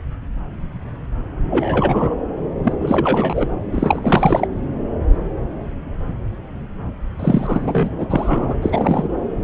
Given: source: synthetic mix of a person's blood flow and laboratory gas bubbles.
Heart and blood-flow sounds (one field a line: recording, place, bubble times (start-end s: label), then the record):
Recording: Doppler ultrasound of blood flow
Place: subclavian vein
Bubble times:
1.50-2.15 s: bubbles
2.63-2.72 s: bubbles
2.80-3.46 s: bubbles
3.72-4.47 s: bubbles
7.19-7.90 s: bubbles
7.97-8.06 s: bubbles
8.10-8.56 s: bubbles
8.62-9.08 s: bubbles
From the record:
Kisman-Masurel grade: 233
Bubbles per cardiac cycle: several, 3 to 8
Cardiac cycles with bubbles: 50 to 99%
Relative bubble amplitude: loud (0.450 to 0.775)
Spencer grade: 3 (all of the cardiac periods contain showers or single bubble signals, but not dominating or overriding the cardiac motion signals)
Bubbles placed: anywhere in the cardiac cycle